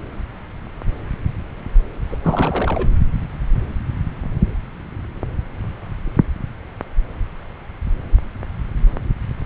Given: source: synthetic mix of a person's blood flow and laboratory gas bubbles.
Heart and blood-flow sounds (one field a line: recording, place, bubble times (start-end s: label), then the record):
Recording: Doppler ultrasound of blood flow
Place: subclavian vein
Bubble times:
2.08-2.17 s: bubbles
2.23-2.88 s: bubbles
From the record:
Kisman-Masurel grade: 212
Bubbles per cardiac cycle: several, 3 to 8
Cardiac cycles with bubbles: 1 to 10%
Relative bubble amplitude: moderate (0.250 to 0.450)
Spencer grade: 1 (occasional bubble signal discernible with the cardiac motion signal, with majority of cardiac periods free of bubbles)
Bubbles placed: anywhere in the cardiac cycle